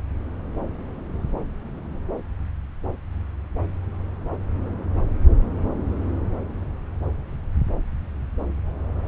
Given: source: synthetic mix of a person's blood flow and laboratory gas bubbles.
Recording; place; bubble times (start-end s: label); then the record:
Doppler ultrasound of blood flow; subclavian vein
no bubbles
From the record:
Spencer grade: 0 (complete lack of bubble signals)